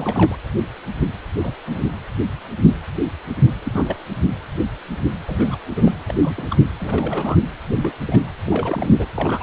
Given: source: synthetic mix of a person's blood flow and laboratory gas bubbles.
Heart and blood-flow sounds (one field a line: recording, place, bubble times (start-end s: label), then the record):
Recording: Doppler ultrasound of blood flow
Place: precordium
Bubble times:
0.00-0.37 s: bubbles
1.43-1.54 s: bubbles
1.66-1.90 s: bubbles
3.65-3.96 s: bubbles
5.25-5.58 s: bubbles
5.76-5.93 s: bubbles
6.08-6.47 s: bubbles
6.50-6.58 s: bubbles
6.79-7.37 s: bubbles
7.74-7.93 s: bubbles
8.07-8.31 s: bubbles
8.46-8.93 s: bubbles
8.99-9.06 s: bubbles
9.15-9.43 s: bubbles
From the record:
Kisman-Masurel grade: 232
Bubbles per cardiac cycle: several, 3 to 8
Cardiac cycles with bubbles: 50 to 99%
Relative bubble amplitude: moderate (0.250 to 0.450)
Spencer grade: 3 (all of the cardiac periods contain showers or single bubble signals, but not dominating or overriding the cardiac motion signals)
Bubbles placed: anywhere in the cardiac cycle